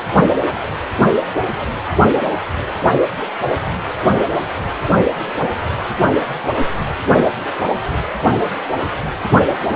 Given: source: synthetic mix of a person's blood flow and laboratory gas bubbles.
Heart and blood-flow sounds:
Doppler ultrasound of blood flow; precordium
no bubbles
From the record:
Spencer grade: 0 (complete lack of bubble signals)

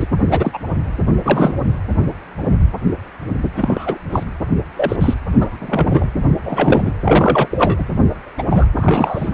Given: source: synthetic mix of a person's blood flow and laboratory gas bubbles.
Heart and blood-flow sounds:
Doppler ultrasound of blood flow; precordium
0.00-0.06 s: bubbles
0.31-0.59 s: bubbles
1.24-1.53 s: bubbles
3.54-3.98 s: bubbles
4.12-4.23 s: bubbles
4.77-4.96 s: bubbles
5.00-5.14 s: bubbles
5.32-6.08 s: bubbles
6.44-6.92 s: bubbles
7.04-7.84 s: bubbles
8.38-8.43 s: bubbles
8.50-8.68 s: bubbles
8.75-9.31 s: bubbles
From the record:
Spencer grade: 3 (all of the cardiac periods contain showers or single bubble signals, but not dominating or overriding the cardiac motion signals); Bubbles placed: anywhere in the cardiac cycle

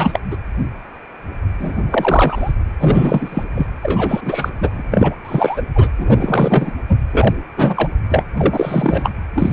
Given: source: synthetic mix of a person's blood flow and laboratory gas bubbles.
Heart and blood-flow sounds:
Doppler ultrasound of blood flow; precordium
0.00-0.20 s: bubbles
0.31-0.37 s: bubbles
1.59-1.81 s: bubbles
1.91-2.52 s: bubbles
2.80-3.44 s: bubbles
3.55-3.67 s: bubbles
3.82-4.50 s: bubbles
4.56-5.15 s: bubbles
5.25-5.62 s: bubbles
5.75-5.88 s: bubbles
5.98-6.73 s: bubbles
6.88-6.96 s: bubbles
7.12-7.35 s: bubbles
7.56-7.89 s: bubbles
8.10-8.24 s: bubbles
8.37-9.11 s: bubbles
9.36-9.53 s: bubbles
From the record:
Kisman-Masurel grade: 333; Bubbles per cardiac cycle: rolling drumbeat, 9 or more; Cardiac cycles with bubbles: 50 to 99%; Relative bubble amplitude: loud (0.450 to 0.775); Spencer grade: 3 (all of the cardiac periods contain showers or single bubble signals, but not dominating or overriding the cardiac motion signals); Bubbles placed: anywhere in the cardiac cycle

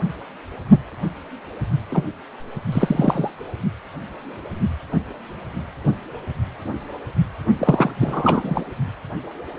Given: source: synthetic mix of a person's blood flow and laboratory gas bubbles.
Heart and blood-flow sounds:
Doppler ultrasound of blood flow; precordium
1.90-2.09 s: bubbles
2.72-3.31 s: bubbles
7.58-7.91 s: bubbles
8.01-8.63 s: bubbles
From the record:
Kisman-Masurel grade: 222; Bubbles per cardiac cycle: several, 3 to 8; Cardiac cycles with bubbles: 10 to 50%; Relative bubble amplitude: moderate (0.250 to 0.450); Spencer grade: 2 (many but less than half of the cardiac periods contain bubble signals, singularly or in groups); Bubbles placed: only in the low amplitude regions of the cardiac cycle

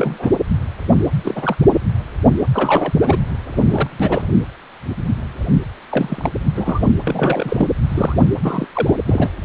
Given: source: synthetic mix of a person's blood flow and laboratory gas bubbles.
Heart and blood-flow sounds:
Doppler ultrasound of blood flow; precordium
0.00-0.30 s: bubbles
1.24-1.56 s: bubbles
2.52-3.21 s: bubbles
3.55-4.29 s: bubbles
5.89-6.30 s: bubbles
6.55-6.92 s: bubbles
7.04-7.67 s: bubbles
7.88-8.15 s: bubbles
8.43-8.66 s: bubbles
8.72-8.96 s: bubbles
9.06-9.28 s: bubbles
From the record:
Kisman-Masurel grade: 232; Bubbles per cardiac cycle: several, 3 to 8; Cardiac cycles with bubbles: 50 to 99%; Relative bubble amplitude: moderate (0.250 to 0.450); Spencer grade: 3 (all of the cardiac periods contain showers or single bubble signals, but not dominating or overriding the cardiac motion signals); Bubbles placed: anywhere in the cardiac cycle

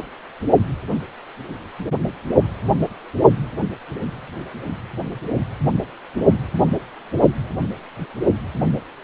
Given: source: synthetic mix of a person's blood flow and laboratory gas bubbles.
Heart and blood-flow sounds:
Doppler ultrasound of blood flow; precordium
no bubbles
From the record:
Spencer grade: 0 (complete lack of bubble signals)

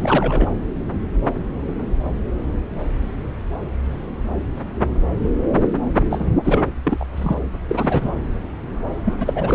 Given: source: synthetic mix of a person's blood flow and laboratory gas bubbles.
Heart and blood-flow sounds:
Doppler ultrasound of blood flow; subclavian vein
0.00-0.51 s: bubbles
6.10-6.31 s: bubbles
6.44-6.65 s: bubbles
6.84-7.05 s: bubbles
7.16-7.41 s: bubbles
7.68-8.12 s: bubbles
9.04-9.14 s: bubbles
9.20-9.55 s: bubbles
From the record:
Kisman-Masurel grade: 223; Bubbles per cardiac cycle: several, 3 to 8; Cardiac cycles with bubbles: 10 to 50%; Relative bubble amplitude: loud (0.450 to 0.775); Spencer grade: 2 (many but less than half of the cardiac periods contain bubble signals, singularly or in groups); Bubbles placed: anywhere in the cardiac cycle

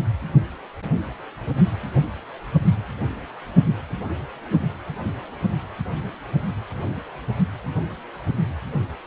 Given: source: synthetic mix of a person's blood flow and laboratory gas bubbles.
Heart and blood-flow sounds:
Doppler ultrasound of blood flow; precordium
no bubbles
From the record:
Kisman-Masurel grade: 000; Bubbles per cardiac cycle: 0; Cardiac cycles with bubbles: 0%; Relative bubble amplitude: no bubbles discernible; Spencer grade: 0 (complete lack of bubble signals)

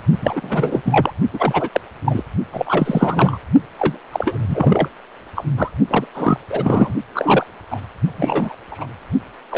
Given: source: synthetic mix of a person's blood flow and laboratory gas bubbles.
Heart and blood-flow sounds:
Doppler ultrasound of blood flow; precordium
0.21-0.82 s: bubbles
0.85-1.11 s: bubbles
1.33-1.69 s: bubbles
1.72-1.80 s: bubbles
2.05-2.24 s: bubbles
2.53-3.38 s: bubbles
3.79-3.98 s: bubbles
4.12-4.88 s: bubbles
5.36-5.45 s: bubbles
5.57-5.71 s: bubbles
5.88-6.07 s: bubbles
6.14-6.40 s: bubbles
6.49-6.94 s: bubbles
7.14-7.46 s: bubbles
7.71-7.80 s: bubbles
8.17-8.56 s: bubbles
8.71-8.86 s: bubbles
9.51-9.58 s: bubbles
From the record:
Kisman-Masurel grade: 343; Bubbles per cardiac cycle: rolling drumbeat, 9 or more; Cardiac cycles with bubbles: 100%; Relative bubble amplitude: loud (0.450 to 0.775); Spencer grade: 3 (all of the cardiac periods contain showers or single bubble signals, but not dominating or overriding the cardiac motion signals); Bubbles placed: only in the low amplitude regions of the cardiac cycle

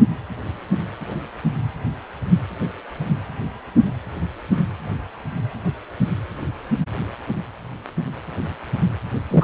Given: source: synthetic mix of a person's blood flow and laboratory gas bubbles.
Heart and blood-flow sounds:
Doppler ultrasound of blood flow; precordium
9.30-9.44 s: bubbles
From the record:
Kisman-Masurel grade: 113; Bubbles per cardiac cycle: 1 to 2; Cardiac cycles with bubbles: 1 to 10%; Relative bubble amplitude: loud (0.450 to 0.775); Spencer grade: 1 (occasional bubble signal discernible with the cardiac motion signal, with majority of cardiac periods free of bubbles); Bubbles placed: anywhere in the cardiac cycle

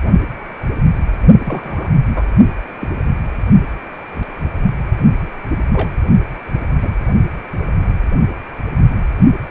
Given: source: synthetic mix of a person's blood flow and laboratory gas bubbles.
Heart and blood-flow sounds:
Doppler ultrasound of blood flow; precordium
1.44-1.88 s: bubbles
2.05-2.25 s: bubbles
2.80-2.88 s: bubbles
5.72-5.89 s: bubbles
6.81-6.90 s: bubbles
From the record:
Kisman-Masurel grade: 122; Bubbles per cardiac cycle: 1 to 2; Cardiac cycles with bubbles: 10 to 50%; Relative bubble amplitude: moderate (0.250 to 0.450); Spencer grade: 2 (many but less than half of the cardiac periods contain bubble signals, singularly or in groups); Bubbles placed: only in the low amplitude regions of the cardiac cycle

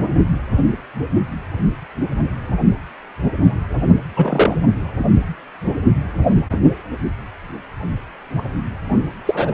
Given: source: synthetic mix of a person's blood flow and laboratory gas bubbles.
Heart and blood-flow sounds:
Doppler ultrasound of blood flow; precordium
4.16-4.57 s: bubbles
9.26-9.53 s: bubbles
From the record:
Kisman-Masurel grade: 123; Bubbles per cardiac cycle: 1 to 2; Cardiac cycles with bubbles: 10 to 50%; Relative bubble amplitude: loud (0.450 to 0.775); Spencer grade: 2 (many but less than half of the cardiac periods contain bubble signals, singularly or in groups); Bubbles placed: only in the low amplitude regions of the cardiac cycle

